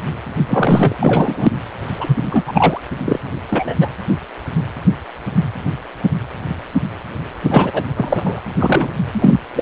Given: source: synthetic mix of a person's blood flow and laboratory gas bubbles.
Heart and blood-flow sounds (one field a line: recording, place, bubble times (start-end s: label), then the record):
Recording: Doppler ultrasound of blood flow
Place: precordium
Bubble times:
0.48-0.96 s: bubbles
1.00-1.50 s: bubbles
1.98-2.17 s: bubbles
2.31-2.45 s: bubbles
2.48-2.79 s: bubbles
3.04-3.19 s: bubbles
3.50-3.75 s: bubbles
3.81-3.89 s: bubbles
7.42-7.83 s: bubbles
7.97-8.39 s: bubbles
8.55-8.88 s: bubbles
9.12-9.39 s: bubbles
9.55-9.62 s: bubbles
From the record:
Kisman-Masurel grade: 223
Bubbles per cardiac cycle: several, 3 to 8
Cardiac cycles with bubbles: 10 to 50%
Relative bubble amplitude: loud (0.450 to 0.775)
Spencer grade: 2 (many but less than half of the cardiac periods contain bubble signals, singularly or in groups)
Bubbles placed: anywhere in the cardiac cycle